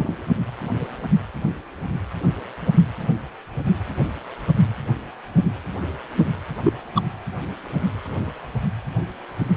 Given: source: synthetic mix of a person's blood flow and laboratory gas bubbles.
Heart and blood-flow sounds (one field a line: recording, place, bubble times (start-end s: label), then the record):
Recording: Doppler ultrasound of blood flow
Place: precordium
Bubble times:
0.00-0.15 s: bubbles
6.64-6.73 s: bubbles
6.95-7.03 s: bubbles
From the record:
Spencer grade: 2 (many but less than half of the cardiac periods contain bubble signals, singularly or in groups)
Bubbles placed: anywhere in the cardiac cycle